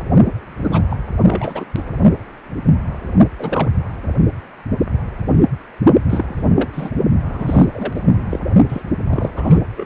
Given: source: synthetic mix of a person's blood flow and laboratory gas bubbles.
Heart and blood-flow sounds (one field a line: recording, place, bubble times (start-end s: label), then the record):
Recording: Doppler ultrasound of blood flow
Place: precordium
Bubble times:
0.64-0.96 s: bubbles
1.23-1.65 s: bubbles
1.75-1.83 s: bubbles
3.39-3.71 s: bubbles
6.09-6.45 s: bubbles
6.55-6.70 s: bubbles
6.73-6.91 s: bubbles
7.29-7.65 s: bubbles
7.72-8.27 s: bubbles
8.29-8.39 s: bubbles
8.68-8.82 s: bubbles
9.08-9.29 s: bubbles
9.36-9.61 s: bubbles
9.76-9.86 s: bubbles
From the record:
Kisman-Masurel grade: 232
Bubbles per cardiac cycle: several, 3 to 8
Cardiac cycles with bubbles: 50 to 99%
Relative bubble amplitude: moderate (0.250 to 0.450)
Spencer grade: 3 (all of the cardiac periods contain showers or single bubble signals, but not dominating or overriding the cardiac motion signals)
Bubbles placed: only in the low amplitude regions of the cardiac cycle